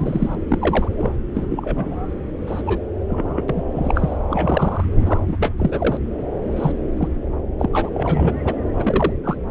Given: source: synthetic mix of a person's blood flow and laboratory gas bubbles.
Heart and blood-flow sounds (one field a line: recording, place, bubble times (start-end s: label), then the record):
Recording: Doppler ultrasound of blood flow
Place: subclavian vein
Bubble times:
0.00-0.35 s: bubbles
0.48-0.58 s: bubbles
0.61-0.89 s: bubbles
0.95-1.11 s: bubbles
1.33-1.96 s: bubbles
2.46-2.62 s: bubbles
2.66-2.79 s: bubbles
3.08-3.42 s: bubbles
3.48-3.62 s: bubbles
3.74-4.17 s: bubbles
4.29-4.84 s: bubbles
5.00-5.19 s: bubbles
5.27-5.37 s: bubbles
5.39-5.53 s: bubbles
5.58-5.98 s: bubbles
6.56-6.72 s: bubbles
6.97-7.08 s: bubbles
7.59-7.68 s: bubbles
7.73-7.90 s: bubbles
7.93-8.34 s: bubbles
8.45-8.54 s: bubbles
8.76-9.13 s: bubbles
9.24-9.37 s: bubbles
From the record:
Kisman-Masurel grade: 242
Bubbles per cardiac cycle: several, 3 to 8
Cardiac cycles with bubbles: 100%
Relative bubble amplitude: moderate (0.250 to 0.450)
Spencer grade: 3 (all of the cardiac periods contain showers or single bubble signals, but not dominating or overriding the cardiac motion signals)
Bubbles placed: anywhere in the cardiac cycle